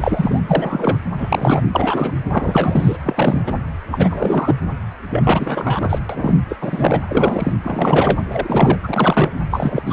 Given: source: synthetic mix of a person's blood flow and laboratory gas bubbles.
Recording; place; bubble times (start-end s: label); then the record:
Doppler ultrasound of blood flow; precordium
0.00-0.40 s: bubbles
0.47-0.98 s: bubbles
1.18-1.62 s: bubbles
1.72-2.12 s: bubbles
2.32-2.96 s: bubbles
3.04-3.43 s: bubbles
3.46-3.54 s: bubbles
3.91-4.55 s: bubbles
5.10-5.99 s: bubbles
6.09-6.35 s: bubbles
6.49-6.57 s: bubbles
6.61-7.01 s: bubbles
7.08-7.52 s: bubbles
7.64-8.20 s: bubbles
8.30-8.79 s: bubbles
8.83-9.29 s: bubbles
9.50-9.82 s: bubbles
9.85-9.93 s: bubbles
From the record:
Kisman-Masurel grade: 343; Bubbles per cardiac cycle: rolling drumbeat, 9 or more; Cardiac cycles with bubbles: 100%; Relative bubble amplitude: loud (0.450 to 0.775); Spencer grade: 3 (all of the cardiac periods contain showers or single bubble signals, but not dominating or overriding the cardiac motion signals); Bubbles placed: anywhere in the cardiac cycle